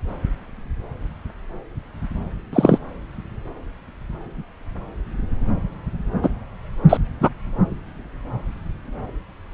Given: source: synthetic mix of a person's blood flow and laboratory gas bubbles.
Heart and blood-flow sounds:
Doppler ultrasound of blood flow; subclavian vein
2.53-2.78 s: bubbles
6.22-6.29 s: bubbles
6.89-6.97 s: bubbles
7.21-7.29 s: bubbles
From the record:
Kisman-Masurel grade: 123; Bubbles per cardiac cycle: 1 to 2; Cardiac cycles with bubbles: 10 to 50%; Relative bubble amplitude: loud (0.450 to 0.775); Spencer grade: 2 (many but less than half of the cardiac periods contain bubble signals, singularly or in groups); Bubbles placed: anywhere in the cardiac cycle

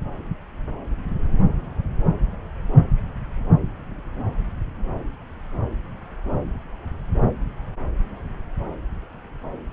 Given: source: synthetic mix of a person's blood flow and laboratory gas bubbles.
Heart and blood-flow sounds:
Doppler ultrasound of blood flow; subclavian vein
no bubbles
From the record:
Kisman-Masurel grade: 000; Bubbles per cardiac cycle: 0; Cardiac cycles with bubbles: 0%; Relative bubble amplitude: no bubbles discernible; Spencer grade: 0 (complete lack of bubble signals)

